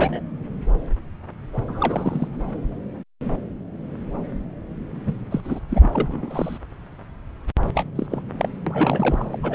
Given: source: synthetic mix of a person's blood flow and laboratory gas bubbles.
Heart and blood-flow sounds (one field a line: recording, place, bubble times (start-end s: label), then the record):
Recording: Doppler ultrasound of blood flow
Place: subclavian vein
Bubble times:
0.00-0.22 s: bubbles
1.68-2.28 s: bubbles
5.06-5.13 s: bubbles
5.31-5.41 s: bubbles
5.45-5.60 s: bubbles
5.69-5.89 s: bubbles
5.92-6.58 s: bubbles
7.74-7.86 s: bubbles
7.96-8.06 s: bubbles
8.10-8.22 s: bubbles
8.37-8.49 s: bubbles
8.66-9.38 s: bubbles
9.43-9.55 s: bubbles
From the record:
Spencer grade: 3 (all of the cardiac periods contain showers or single bubble signals, but not dominating or overriding the cardiac motion signals)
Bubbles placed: anywhere in the cardiac cycle